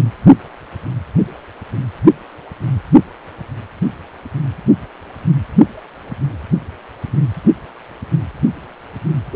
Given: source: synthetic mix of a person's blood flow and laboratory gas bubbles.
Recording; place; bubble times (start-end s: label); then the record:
Doppler ultrasound of blood flow; precordium
9.32-9.36 s: bubbles
From the record:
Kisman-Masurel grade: 122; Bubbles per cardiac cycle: 1 to 2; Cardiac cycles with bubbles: 10 to 50%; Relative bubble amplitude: moderate (0.250 to 0.450); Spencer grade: 2 (many but less than half of the cardiac periods contain bubble signals, singularly or in groups); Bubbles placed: anywhere in the cardiac cycle